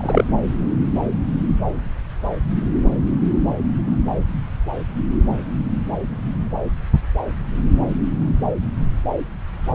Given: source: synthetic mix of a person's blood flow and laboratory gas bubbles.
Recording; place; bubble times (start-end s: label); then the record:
Doppler ultrasound of blood flow; subclavian vein
0.00-0.24 s: bubbles
From the record:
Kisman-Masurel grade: 113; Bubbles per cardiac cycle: 1 to 2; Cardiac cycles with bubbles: 1 to 10%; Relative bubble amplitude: loud (0.450 to 0.775); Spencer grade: 1 (occasional bubble signal discernible with the cardiac motion signal, with majority of cardiac periods free of bubbles); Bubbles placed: anywhere in the cardiac cycle